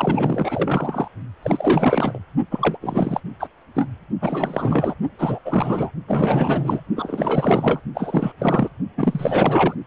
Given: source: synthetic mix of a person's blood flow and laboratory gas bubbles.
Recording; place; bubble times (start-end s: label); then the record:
Doppler ultrasound of blood flow; precordium
0.00-1.08 s: bubbles
1.43-2.19 s: bubbles
2.51-2.77 s: bubbles
2.81-3.21 s: bubbles
3.39-3.48 s: bubbles
3.75-3.88 s: bubbles
4.21-4.95 s: bubbles
5.18-5.38 s: bubbles
5.45-5.91 s: bubbles
6.07-6.80 s: bubbles
6.96-7.80 s: bubbles
7.94-8.33 s: bubbles
8.38-8.69 s: bubbles
8.97-9.75 s: bubbles
From the record:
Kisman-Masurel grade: 444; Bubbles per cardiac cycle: continuous sound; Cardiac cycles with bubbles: 100%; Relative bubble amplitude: maximal (0.775 to 0.999); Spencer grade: 4 (maximum detectable bubble signal sounding continuously throughout systole and diastole of every cardiac period, and overriding the amplitude of the normal cardiac signals); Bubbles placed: only in the low amplitude regions of the cardiac cycle